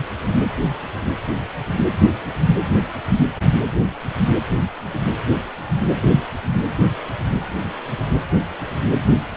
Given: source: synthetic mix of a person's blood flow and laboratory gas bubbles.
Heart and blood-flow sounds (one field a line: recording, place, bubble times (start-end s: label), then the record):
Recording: Doppler ultrasound of blood flow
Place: precordium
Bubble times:
no bubbles
From the record:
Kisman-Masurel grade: 000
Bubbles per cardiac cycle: 0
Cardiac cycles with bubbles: 0%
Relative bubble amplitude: no bubbles discernible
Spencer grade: 0 (complete lack of bubble signals)